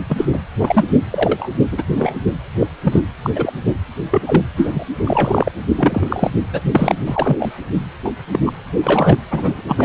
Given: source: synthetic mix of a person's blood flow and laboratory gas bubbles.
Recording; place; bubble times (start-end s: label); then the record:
Doppler ultrasound of blood flow; precordium
0.09-0.28 s: bubbles
0.32-0.39 s: bubbles
0.59-0.84 s: bubbles
1.11-1.50 s: bubbles
1.71-1.83 s: bubbles
1.92-2.17 s: bubbles
2.59-2.67 s: bubbles
2.83-3.00 s: bubbles
3.23-3.30 s: bubbles
3.35-3.53 s: bubbles
4.11-4.22 s: bubbles
4.27-4.43 s: bubbles
4.56-4.86 s: bubbles
5.04-5.52 s: bubbles
5.75-6.31 s: bubbles
6.52-6.61 s: bubbles
6.71-6.96 s: bubbles
7.06-7.52 s: bubbles
7.74-7.83 s: bubbles
8.04-8.11 s: bubbles
8.32-8.39 s: bubbles
8.46-8.52 s: bubbles
8.81-9.16 s: bubbles
9.31-9.62 s: bubbles
9.67-9.85 s: bubbles
From the record:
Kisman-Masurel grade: 243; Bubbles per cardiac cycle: several, 3 to 8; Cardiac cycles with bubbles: 100%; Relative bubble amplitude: loud (0.450 to 0.775); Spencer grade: 3 (all of the cardiac periods contain showers or single bubble signals, but not dominating or overriding the cardiac motion signals); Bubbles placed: anywhere in the cardiac cycle